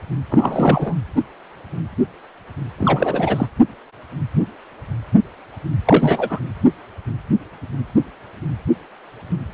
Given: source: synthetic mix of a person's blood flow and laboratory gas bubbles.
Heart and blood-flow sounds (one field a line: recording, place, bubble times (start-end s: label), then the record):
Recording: Doppler ultrasound of blood flow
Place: precordium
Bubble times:
0.30-0.95 s: bubbles
2.78-3.47 s: bubbles
5.85-6.40 s: bubbles
From the record:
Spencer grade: 2 (many but less than half of the cardiac periods contain bubble signals, singularly or in groups)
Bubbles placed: anywhere in the cardiac cycle